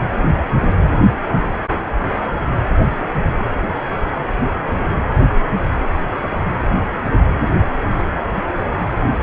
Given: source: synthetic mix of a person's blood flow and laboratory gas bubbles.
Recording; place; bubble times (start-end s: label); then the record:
Doppler ultrasound of blood flow; precordium
no bubbles
From the record:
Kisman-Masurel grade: 000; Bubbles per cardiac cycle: 0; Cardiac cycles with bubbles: 0%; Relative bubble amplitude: no bubbles discernible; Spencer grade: 0 (complete lack of bubble signals)